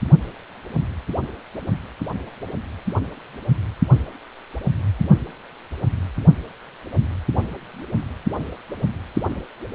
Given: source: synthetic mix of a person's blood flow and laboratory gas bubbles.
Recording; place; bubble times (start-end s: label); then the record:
Doppler ultrasound of blood flow; precordium
no bubbles
From the record:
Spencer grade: 0 (complete lack of bubble signals)